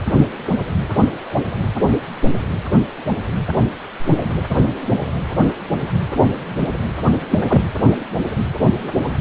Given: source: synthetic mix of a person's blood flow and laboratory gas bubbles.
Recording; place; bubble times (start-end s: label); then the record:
Doppler ultrasound of blood flow; precordium
7.31-7.40 s: bubbles
7.49-7.62 s: bubbles
From the record:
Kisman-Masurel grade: 113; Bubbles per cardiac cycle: 1 to 2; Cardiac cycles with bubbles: 1 to 10%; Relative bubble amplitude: loud (0.450 to 0.775); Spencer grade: 1 (occasional bubble signal discernible with the cardiac motion signal, with majority of cardiac periods free of bubbles); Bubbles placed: anywhere in the cardiac cycle